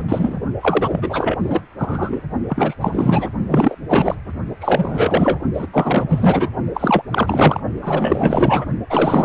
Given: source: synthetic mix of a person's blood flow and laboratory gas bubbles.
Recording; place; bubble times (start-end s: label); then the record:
Doppler ultrasound of blood flow; precordium
0.00-0.02 s: bubbles
0.08-0.40 s: bubbles
0.61-1.39 s: bubbles
1.43-1.63 s: bubbles
1.78-2.22 s: bubbles
2.48-2.75 s: bubbles
2.81-3.29 s: bubbles
3.48-3.75 s: bubbles
3.88-4.16 s: bubbles
4.60-5.39 s: bubbles
5.54-5.67 s: bubbles
5.72-6.05 s: bubbles
6.08-6.48 s: bubbles
6.74-7.03 s: bubbles
7.10-7.60 s: bubbles
7.81-8.66 s: bubbles
8.90-9.25 s: bubbles
From the record:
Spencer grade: 4 (maximum detectable bubble signal sounding continuously throughout systole and diastole of every cardiac period, and overriding the amplitude of the normal cardiac signals); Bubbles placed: only in the low amplitude regions of the cardiac cycle